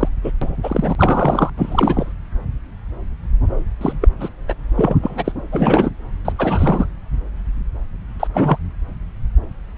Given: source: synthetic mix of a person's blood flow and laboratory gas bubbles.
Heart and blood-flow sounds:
Doppler ultrasound of blood flow; subclavian vein
0.00-0.09 s: bubbles
0.24-0.32 s: bubbles
0.41-0.56 s: bubbles
0.63-0.95 s: bubbles
0.98-1.50 s: bubbles
1.57-2.12 s: bubbles
3.81-3.93 s: bubbles
4.01-4.08 s: bubbles
4.20-4.29 s: bubbles
4.48-4.54 s: bubbles
4.75-5.32 s: bubbles
5.51-5.91 s: bubbles
6.25-6.33 s: bubbles
6.38-6.87 s: bubbles
8.20-8.28 s: bubbles
8.33-8.58 s: bubbles
From the record:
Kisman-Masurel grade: 233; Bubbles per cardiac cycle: several, 3 to 8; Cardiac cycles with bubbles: 50 to 99%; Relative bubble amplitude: loud (0.450 to 0.775); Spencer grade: 3 (all of the cardiac periods contain showers or single bubble signals, but not dominating or overriding the cardiac motion signals); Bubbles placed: anywhere in the cardiac cycle

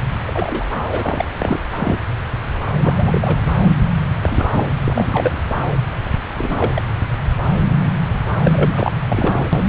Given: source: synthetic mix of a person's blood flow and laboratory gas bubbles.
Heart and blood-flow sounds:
Doppler ultrasound of blood flow; subclavian vein
0.27-0.76 s: bubbles
0.91-1.25 s: bubbles
1.40-1.59 s: bubbles
1.75-1.97 s: bubbles
2.83-3.50 s: bubbles
4.21-4.65 s: bubbles
4.84-5.42 s: bubbles
6.38-6.82 s: bubbles
8.43-8.92 s: bubbles
9.08-9.47 s: bubbles
From the record:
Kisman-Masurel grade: 232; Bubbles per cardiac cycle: several, 3 to 8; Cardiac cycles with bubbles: 50 to 99%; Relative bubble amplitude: moderate (0.250 to 0.450); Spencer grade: 3 (all of the cardiac periods contain showers or single bubble signals, but not dominating or overriding the cardiac motion signals); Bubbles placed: anywhere in the cardiac cycle

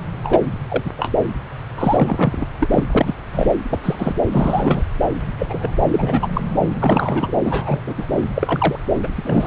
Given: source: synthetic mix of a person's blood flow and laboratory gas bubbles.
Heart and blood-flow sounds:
Doppler ultrasound of blood flow; subclavian vein
0.23-0.41 s: bubbles
0.69-0.91 s: bubbles
0.97-1.14 s: bubbles
1.78-2.47 s: bubbles
2.60-2.83 s: bubbles
2.92-3.15 s: bubbles
3.32-3.50 s: bubbles
3.70-3.79 s: bubbles
3.83-4.20 s: bubbles
4.33-4.82 s: bubbles
5.38-5.71 s: bubbles
5.91-6.27 s: bubbles
6.34-6.42 s: bubbles
6.79-7.32 s: bubbles
7.44-7.80 s: bubbles
7.86-7.95 s: bubbles
7.98-8.06 s: bubbles
8.12-8.22 s: bubbles
8.34-8.79 s: bubbles
9.03-9.47 s: bubbles
From the record:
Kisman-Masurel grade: 243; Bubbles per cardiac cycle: several, 3 to 8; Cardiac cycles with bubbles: 100%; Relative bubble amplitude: loud (0.450 to 0.775); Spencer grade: 3 (all of the cardiac periods contain showers or single bubble signals, but not dominating or overriding the cardiac motion signals); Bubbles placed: anywhere in the cardiac cycle

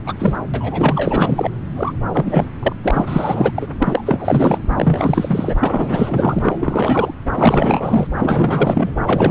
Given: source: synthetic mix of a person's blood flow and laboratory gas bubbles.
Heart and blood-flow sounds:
Doppler ultrasound of blood flow; subclavian vein
0.05-0.14 s: bubbles
0.19-0.39 s: bubbles
0.53-1.50 s: bubbles
1.76-1.93 s: bubbles
2.13-2.46 s: bubbles
2.62-2.73 s: bubbles
2.83-3.52 s: bubbles
3.55-3.67 s: bubbles
3.79-4.58 s: bubbles
4.76-5.54 s: bubbles
5.60-7.14 s: bubbles
7.34-8.07 s: bubbles
8.15-8.96 s: bubbles
9.06-9.31 s: bubbles
From the record:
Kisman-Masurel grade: 444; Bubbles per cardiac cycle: continuous sound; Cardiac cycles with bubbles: 100%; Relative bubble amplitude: maximal (0.775 to 0.999); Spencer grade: 4 (maximum detectable bubble signal sounding continuously throughout systole and diastole of every cardiac period, and overriding the amplitude of the normal cardiac signals); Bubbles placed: anywhere in the cardiac cycle

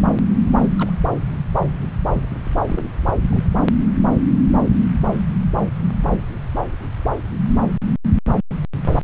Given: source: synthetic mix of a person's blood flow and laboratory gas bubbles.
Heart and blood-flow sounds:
Doppler ultrasound of blood flow; subclavian vein
0.78-0.93 s: bubbles
1.12-1.16 s: bubbles
2.54-2.86 s: bubbles
3.30-3.49 s: bubbles
From the record:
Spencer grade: 2 (many but less than half of the cardiac periods contain bubble signals, singularly or in groups); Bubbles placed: anywhere in the cardiac cycle

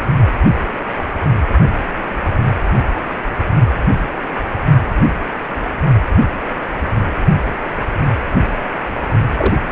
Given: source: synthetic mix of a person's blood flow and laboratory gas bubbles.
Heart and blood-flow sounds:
Doppler ultrasound of blood flow; precordium
9.37-9.54 s: bubbles
From the record:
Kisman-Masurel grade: 112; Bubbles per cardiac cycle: 1 to 2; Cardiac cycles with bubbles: 1 to 10%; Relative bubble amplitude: moderate (0.250 to 0.450); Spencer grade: 1 (occasional bubble signal discernible with the cardiac motion signal, with majority of cardiac periods free of bubbles); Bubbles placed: only in the low amplitude regions of the cardiac cycle

